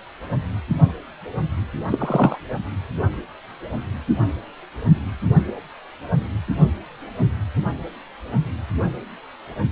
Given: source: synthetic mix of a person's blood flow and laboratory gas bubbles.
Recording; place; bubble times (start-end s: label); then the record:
Doppler ultrasound of blood flow; precordium
1.91-2.38 s: bubbles
From the record:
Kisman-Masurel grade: 213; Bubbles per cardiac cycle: several, 3 to 8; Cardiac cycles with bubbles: 1 to 10%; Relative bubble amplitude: loud (0.450 to 0.775); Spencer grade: 1 (occasional bubble signal discernible with the cardiac motion signal, with majority of cardiac periods free of bubbles); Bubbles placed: anywhere in the cardiac cycle